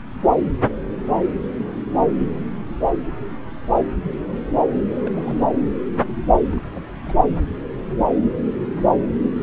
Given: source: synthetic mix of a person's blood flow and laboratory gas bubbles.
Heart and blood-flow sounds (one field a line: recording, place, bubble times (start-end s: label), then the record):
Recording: Doppler ultrasound of blood flow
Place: subclavian vein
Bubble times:
4.89-5.46 s: bubbles
6.51-6.67 s: bubbles
6.71-6.83 s: bubbles
7.04-7.14 s: bubbles
From the record:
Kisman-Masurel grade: 221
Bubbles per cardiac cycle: several, 3 to 8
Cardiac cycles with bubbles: 10 to 50%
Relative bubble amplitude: barely perceptible (0.100 to 0.250)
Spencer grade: 2 (many but less than half of the cardiac periods contain bubble signals, singularly or in groups)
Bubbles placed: anywhere in the cardiac cycle